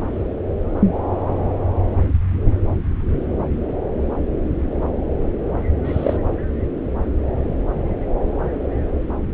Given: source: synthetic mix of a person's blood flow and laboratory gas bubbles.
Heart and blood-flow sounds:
Doppler ultrasound of blood flow; subclavian vein
5.85-6.17 s: bubbles
From the record:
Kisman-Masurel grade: 112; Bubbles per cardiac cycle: 1 to 2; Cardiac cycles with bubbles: 1 to 10%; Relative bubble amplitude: moderate (0.250 to 0.450); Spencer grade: 1 (occasional bubble signal discernible with the cardiac motion signal, with majority of cardiac periods free of bubbles); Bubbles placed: anywhere in the cardiac cycle

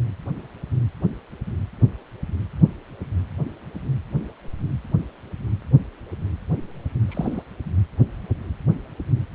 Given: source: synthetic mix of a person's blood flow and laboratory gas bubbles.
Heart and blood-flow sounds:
Doppler ultrasound of blood flow; precordium
7.08-7.42 s: bubbles
From the record:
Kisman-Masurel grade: 112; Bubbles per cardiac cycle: 1 to 2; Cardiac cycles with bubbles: 1 to 10%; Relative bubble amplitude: moderate (0.250 to 0.450); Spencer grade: 1 (occasional bubble signal discernible with the cardiac motion signal, with majority of cardiac periods free of bubbles); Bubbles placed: anywhere in the cardiac cycle

